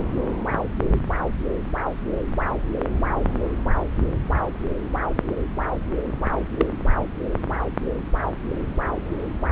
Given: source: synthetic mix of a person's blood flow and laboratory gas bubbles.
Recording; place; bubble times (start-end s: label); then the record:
Doppler ultrasound of blood flow; subclavian vein
6.57-6.67 s: bubbles
From the record:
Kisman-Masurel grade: 112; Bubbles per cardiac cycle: 1 to 2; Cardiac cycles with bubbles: 1 to 10%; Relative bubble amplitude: moderate (0.250 to 0.450); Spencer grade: 1 (occasional bubble signal discernible with the cardiac motion signal, with majority of cardiac periods free of bubbles); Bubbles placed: anywhere in the cardiac cycle